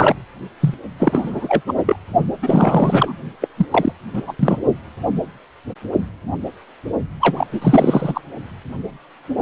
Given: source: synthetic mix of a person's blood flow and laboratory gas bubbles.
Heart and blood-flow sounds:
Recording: Doppler ultrasound of blood flow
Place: precordium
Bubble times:
0.00-0.15 s: bubbles
0.60-0.74 s: bubbles
0.98-1.61 s: bubbles
1.67-1.74 s: bubbles
1.77-1.96 s: bubbles
2.42-3.16 s: bubbles
3.42-3.48 s: bubbles
3.56-3.66 s: bubbles
3.71-3.93 s: bubbles
4.13-4.22 s: bubbles
4.27-4.33 s: bubbles
4.39-4.61 s: bubbles
7.20-7.46 s: bubbles
7.49-8.21 s: bubbles
From the record:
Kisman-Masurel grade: 333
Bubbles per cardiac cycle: rolling drumbeat, 9 or more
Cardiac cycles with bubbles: 50 to 99%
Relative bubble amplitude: loud (0.450 to 0.775)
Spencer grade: 3 (all of the cardiac periods contain showers or single bubble signals, but not dominating or overriding the cardiac motion signals)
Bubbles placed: only in the low amplitude regions of the cardiac cycle

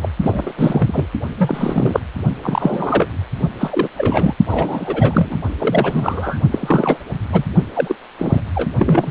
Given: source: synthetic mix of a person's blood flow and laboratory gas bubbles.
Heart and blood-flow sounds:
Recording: Doppler ultrasound of blood flow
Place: precordium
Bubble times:
0.01-0.09 s: bubbles
0.21-0.52 s: bubbles
0.55-1.05 s: bubbles
1.38-2.00 s: bubbles
2.42-3.07 s: bubbles
3.59-3.88 s: bubbles
3.97-4.34 s: bubbles
4.47-5.38 s: bubbles
5.58-6.38 s: bubbles
6.51-6.97 s: bubbles
7.31-7.44 s: bubbles
7.74-7.95 s: bubbles
8.19-8.41 s: bubbles
8.55-8.69 s: bubbles
8.79-9.11 s: bubbles
From the record:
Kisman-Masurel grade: 343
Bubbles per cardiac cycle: rolling drumbeat, 9 or more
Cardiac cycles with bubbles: 100%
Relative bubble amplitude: loud (0.450 to 0.775)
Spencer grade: 3 (all of the cardiac periods contain showers or single bubble signals, but not dominating or overriding the cardiac motion signals)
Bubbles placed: only in the low amplitude regions of the cardiac cycle

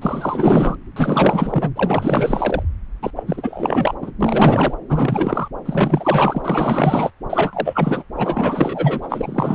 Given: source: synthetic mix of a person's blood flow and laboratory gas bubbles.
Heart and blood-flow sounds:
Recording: Doppler ultrasound of blood flow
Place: subclavian vein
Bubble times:
0.01-0.77 s: bubbles
0.96-1.70 s: bubbles
1.75-2.62 s: bubbles
3.02-3.10 s: bubbles
3.16-3.24 s: bubbles
3.27-3.95 s: bubbles
4.01-4.11 s: bubbles
4.21-4.74 s: bubbles
4.88-5.48 s: bubbles
5.66-7.10 s: bubbles
7.29-8.03 s: bubbles
8.15-9.55 s: bubbles
From the record:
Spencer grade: 4 (maximum detectable bubble signal sounding continuously throughout systole and diastole of every cardiac period, and overriding the amplitude of the normal cardiac signals)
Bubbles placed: anywhere in the cardiac cycle

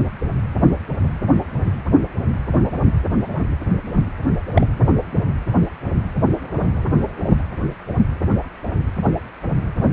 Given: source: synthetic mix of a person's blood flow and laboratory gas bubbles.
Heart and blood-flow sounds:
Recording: Doppler ultrasound of blood flow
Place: precordium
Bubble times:
4.56-4.67 s: bubbles
From the record:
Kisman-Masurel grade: 112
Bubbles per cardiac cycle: 1 to 2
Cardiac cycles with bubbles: 1 to 10%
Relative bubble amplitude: moderate (0.250 to 0.450)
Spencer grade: 1 (occasional bubble signal discernible with the cardiac motion signal, with majority of cardiac periods free of bubbles)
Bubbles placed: anywhere in the cardiac cycle

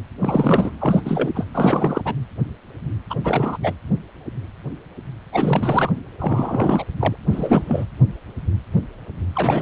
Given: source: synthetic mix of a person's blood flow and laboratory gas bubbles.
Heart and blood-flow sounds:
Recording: Doppler ultrasound of blood flow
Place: precordium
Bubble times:
0.20-0.70 s: bubbles
0.79-1.01 s: bubbles
1.05-1.44 s: bubbles
1.54-2.02 s: bubbles
2.04-2.13 s: bubbles
3.10-3.15 s: bubbles
3.24-3.58 s: bubbles
3.63-3.73 s: bubbles
5.32-5.92 s: bubbles
6.19-6.83 s: bubbles
6.99-7.16 s: bubbles
7.29-7.85 s: bubbles
9.35-9.61 s: bubbles
From the record:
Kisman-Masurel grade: 332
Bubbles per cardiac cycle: rolling drumbeat, 9 or more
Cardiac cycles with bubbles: 50 to 99%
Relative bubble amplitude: moderate (0.250 to 0.450)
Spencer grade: 3 (all of the cardiac periods contain showers or single bubble signals, but not dominating or overriding the cardiac motion signals)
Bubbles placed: anywhere in the cardiac cycle

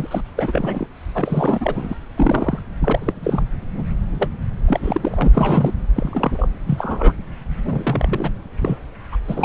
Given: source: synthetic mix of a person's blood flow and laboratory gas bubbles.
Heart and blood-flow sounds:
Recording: Doppler ultrasound of blood flow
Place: subclavian vein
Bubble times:
0.00-0.07 s: bubbles
0.10-0.22 s: bubbles
0.36-0.87 s: bubbles
1.14-1.95 s: bubbles
2.17-2.59 s: bubbles
2.80-3.14 s: bubbles
3.23-3.43 s: bubbles
3.75-3.83 s: bubbles
4.12-4.28 s: bubbles
4.66-5.29 s: bubbles
5.33-5.72 s: bubbles
5.95-6.49 s: bubbles
6.67-7.12 s: bubbles
7.64-8.30 s: bubbles
8.62-8.77 s: bubbles
9.12-9.16 s: bubbles
9.25-9.45 s: bubbles
From the record:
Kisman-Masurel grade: 242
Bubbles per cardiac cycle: several, 3 to 8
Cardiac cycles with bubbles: 100%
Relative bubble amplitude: moderate (0.250 to 0.450)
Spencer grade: 3 (all of the cardiac periods contain showers or single bubble signals, but not dominating or overriding the cardiac motion signals)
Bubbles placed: anywhere in the cardiac cycle

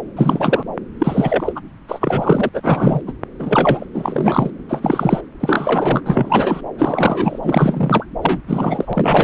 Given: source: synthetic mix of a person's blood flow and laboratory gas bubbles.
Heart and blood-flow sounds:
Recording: Doppler ultrasound of blood flow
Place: subclavian vein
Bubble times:
0.16-0.64 s: bubbles
0.99-1.52 s: bubbles
1.55-1.60 s: bubbles
1.88-2.49 s: bubbles
2.54-2.60 s: bubbles
2.63-3.01 s: bubbles
3.07-3.12 s: bubbles
3.39-3.85 s: bubbles
3.93-4.50 s: bubbles
4.68-5.21 s: bubbles
5.40-6.00 s: bubbles
6.05-6.61 s: bubbles
6.78-7.39 s: bubbles
7.42-8.06 s: bubbles
8.22-8.41 s: bubbles
8.48-9.23 s: bubbles
From the record:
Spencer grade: 3 (all of the cardiac periods contain showers or single bubble signals, but not dominating or overriding the cardiac motion signals)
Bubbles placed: anywhere in the cardiac cycle

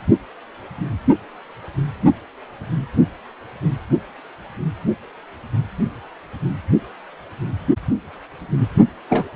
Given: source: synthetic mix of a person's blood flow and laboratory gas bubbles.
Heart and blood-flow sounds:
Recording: Doppler ultrasound of blood flow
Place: precordium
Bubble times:
9.09-9.27 s: bubbles
From the record:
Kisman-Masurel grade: 112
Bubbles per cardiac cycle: 1 to 2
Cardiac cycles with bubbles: 1 to 10%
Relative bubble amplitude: moderate (0.250 to 0.450)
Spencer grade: 1 (occasional bubble signal discernible with the cardiac motion signal, with majority of cardiac periods free of bubbles)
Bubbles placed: only in the low amplitude regions of the cardiac cycle

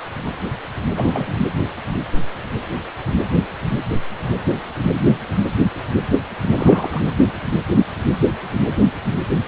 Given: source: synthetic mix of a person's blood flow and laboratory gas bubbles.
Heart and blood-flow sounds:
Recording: Doppler ultrasound of blood flow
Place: precordium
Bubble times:
0.96-1.34 s: bubbles
6.56-7.07 s: bubbles
From the record:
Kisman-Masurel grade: 222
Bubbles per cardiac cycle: several, 3 to 8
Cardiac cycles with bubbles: 10 to 50%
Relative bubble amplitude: moderate (0.250 to 0.450)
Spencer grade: 2 (many but less than half of the cardiac periods contain bubble signals, singularly or in groups)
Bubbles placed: anywhere in the cardiac cycle

